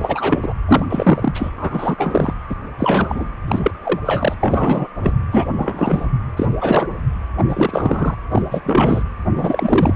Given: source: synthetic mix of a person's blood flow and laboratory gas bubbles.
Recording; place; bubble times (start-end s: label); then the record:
Doppler ultrasound of blood flow; precordium
0.00-0.53 s: bubbles
0.67-0.85 s: bubbles
0.90-1.31 s: bubbles
1.34-1.53 s: bubbles
1.56-2.34 s: bubbles
2.49-2.55 s: bubbles
2.79-3.29 s: bubbles
3.48-3.72 s: bubbles
3.85-3.99 s: bubbles
4.05-4.34 s: bubbles
4.40-4.88 s: bubbles
5.03-5.12 s: bubbles
5.31-5.45 s: bubbles
5.57-6.06 s: bubbles
6.37-6.46 s: bubbles
6.60-6.87 s: bubbles
7.38-7.44 s: bubbles
7.49-8.16 s: bubbles
8.32-8.43 s: bubbles
8.51-8.60 s: bubbles
8.63-9.03 s: bubbles
9.35-9.94 s: bubbles
From the record:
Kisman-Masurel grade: 343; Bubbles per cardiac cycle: rolling drumbeat, 9 or more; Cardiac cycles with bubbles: 100%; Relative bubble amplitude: loud (0.450 to 0.775); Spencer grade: 3 (all of the cardiac periods contain showers or single bubble signals, but not dominating or overriding the cardiac motion signals); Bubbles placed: anywhere in the cardiac cycle